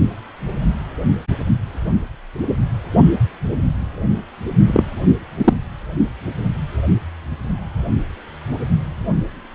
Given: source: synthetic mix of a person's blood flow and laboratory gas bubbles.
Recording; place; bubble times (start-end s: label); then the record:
Doppler ultrasound of blood flow; precordium
4.66-4.83 s: bubbles
5.38-5.54 s: bubbles
From the record:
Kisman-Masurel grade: 213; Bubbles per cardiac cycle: several, 3 to 8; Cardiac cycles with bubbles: 1 to 10%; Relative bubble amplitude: loud (0.450 to 0.775); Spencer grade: 1 (occasional bubble signal discernible with the cardiac motion signal, with majority of cardiac periods free of bubbles); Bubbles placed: only in the low amplitude regions of the cardiac cycle